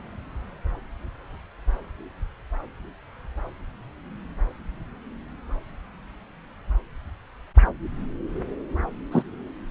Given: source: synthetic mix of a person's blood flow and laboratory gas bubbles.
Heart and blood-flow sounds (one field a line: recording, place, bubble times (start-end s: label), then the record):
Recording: Doppler ultrasound of blood flow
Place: subclavian vein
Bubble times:
9.11-9.22 s: bubbles
From the record:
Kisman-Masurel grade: 112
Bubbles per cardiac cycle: 1 to 2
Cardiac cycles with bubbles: 1 to 10%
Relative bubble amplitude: moderate (0.250 to 0.450)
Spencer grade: 1 (occasional bubble signal discernible with the cardiac motion signal, with majority of cardiac periods free of bubbles)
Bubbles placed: anywhere in the cardiac cycle